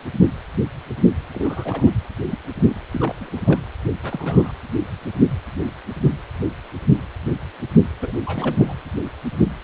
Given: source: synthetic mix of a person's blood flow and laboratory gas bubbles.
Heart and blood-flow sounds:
Doppler ultrasound of blood flow; precordium
1.33-1.92 s: bubbles
2.31-2.38 s: bubbles
2.58-2.83 s: bubbles
2.92-3.15 s: bubbles
3.21-3.65 s: bubbles
4.03-4.53 s: bubbles
8.01-8.12 s: bubbles
8.25-8.74 s: bubbles
From the record:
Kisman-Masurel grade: 221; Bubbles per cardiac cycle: several, 3 to 8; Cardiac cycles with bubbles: 10 to 50%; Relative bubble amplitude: barely perceptible (0.100 to 0.250); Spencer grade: 2 (many but less than half of the cardiac periods contain bubble signals, singularly or in groups); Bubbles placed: anywhere in the cardiac cycle

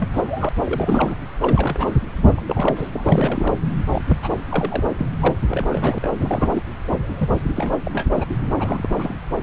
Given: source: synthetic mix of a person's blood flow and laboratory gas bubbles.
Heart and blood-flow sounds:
Doppler ultrasound of blood flow; subclavian vein
0.00-0.09 s: bubbles
0.13-0.49 s: bubbles
0.65-1.16 s: bubbles
1.42-1.92 s: bubbles
2.17-2.34 s: bubbles
2.37-2.41 s: bubbles
2.48-3.52 s: bubbles
3.92-4.01 s: bubbles
4.10-4.17 s: bubbles
4.22-4.33 s: bubbles
4.50-4.84 s: bubbles
4.98-5.05 s: bubbles
5.21-5.35 s: bubbles
5.49-5.99 s: bubbles
6.02-6.11 s: bubbles
6.21-6.63 s: bubbles
7.17-7.29 s: bubbles
7.55-7.72 s: bubbles
7.84-8.07 s: bubbles
8.14-8.38 s: bubbles
8.52-8.54 s: bubbles
8.59-9.14 s: bubbles
From the record:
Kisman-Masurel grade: 342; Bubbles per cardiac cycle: rolling drumbeat, 9 or more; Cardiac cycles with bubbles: 100%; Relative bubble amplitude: moderate (0.250 to 0.450); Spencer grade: 3 (all of the cardiac periods contain showers or single bubble signals, but not dominating or overriding the cardiac motion signals); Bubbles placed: anywhere in the cardiac cycle

